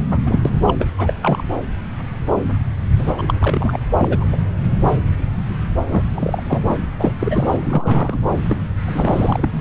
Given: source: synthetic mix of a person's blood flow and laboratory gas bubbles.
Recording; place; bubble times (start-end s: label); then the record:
Doppler ultrasound of blood flow; subclavian vein
0.11-0.18 s: bubbles
0.26-0.40 s: bubbles
0.45-0.51 s: bubbles
0.67-0.75 s: bubbles
0.79-0.87 s: bubbles
0.97-1.13 s: bubbles
1.21-1.43 s: bubbles
2.98-3.12 s: bubbles
3.17-3.23 s: bubbles
3.27-3.33 s: bubbles
3.40-3.79 s: bubbles
3.97-4.26 s: bubbles
4.32-4.37 s: bubbles
5.88-6.03 s: bubbles
6.14-6.43 s: bubbles
6.49-6.77 s: bubbles
6.99-7.15 s: bubbles
7.20-8.19 s: bubbles
8.49-8.58 s: bubbles
8.86-9.49 s: bubbles
From the record:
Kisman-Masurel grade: 332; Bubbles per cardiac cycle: rolling drumbeat, 9 or more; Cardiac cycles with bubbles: 50 to 99%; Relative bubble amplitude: moderate (0.250 to 0.450); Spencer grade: 3 (all of the cardiac periods contain showers or single bubble signals, but not dominating or overriding the cardiac motion signals); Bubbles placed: anywhere in the cardiac cycle